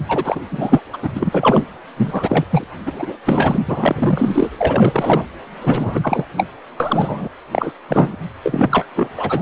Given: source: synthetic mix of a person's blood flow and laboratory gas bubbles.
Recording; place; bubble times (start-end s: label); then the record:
Doppler ultrasound of blood flow; precordium
0.08-0.40 s: bubbles
0.51-0.81 s: bubbles
0.93-0.96 s: bubbles
1.02-1.70 s: bubbles
1.97-2.45 s: bubbles
2.50-2.64 s: bubbles
2.86-3.17 s: bubbles
3.25-3.62 s: bubbles
3.67-4.50 s: bubbles
4.58-5.25 s: bubbles
5.61-6.25 s: bubbles
6.37-6.46 s: bubbles
6.80-7.29 s: bubbles
7.51-7.72 s: bubbles
7.88-8.16 s: bubbles
8.43-8.86 s: bubbles
8.95-9.09 s: bubbles
9.15-9.42 s: bubbles
From the record:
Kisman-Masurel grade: 343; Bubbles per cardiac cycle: rolling drumbeat, 9 or more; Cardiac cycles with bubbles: 100%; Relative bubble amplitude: loud (0.450 to 0.775); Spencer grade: 3 (all of the cardiac periods contain showers or single bubble signals, but not dominating or overriding the cardiac motion signals); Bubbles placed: anywhere in the cardiac cycle